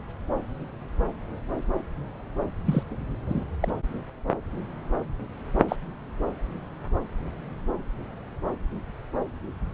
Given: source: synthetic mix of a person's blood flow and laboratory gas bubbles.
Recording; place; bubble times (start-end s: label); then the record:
Doppler ultrasound of blood flow; subclavian vein
2.66-2.83 s: bubbles
3.25-3.44 s: bubbles
3.60-3.68 s: bubbles
5.68-5.76 s: bubbles
From the record:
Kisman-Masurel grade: 121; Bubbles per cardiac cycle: 1 to 2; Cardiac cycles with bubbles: 10 to 50%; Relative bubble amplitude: barely perceptible (0.100 to 0.250); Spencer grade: 2 (many but less than half of the cardiac periods contain bubble signals, singularly or in groups); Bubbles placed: anywhere in the cardiac cycle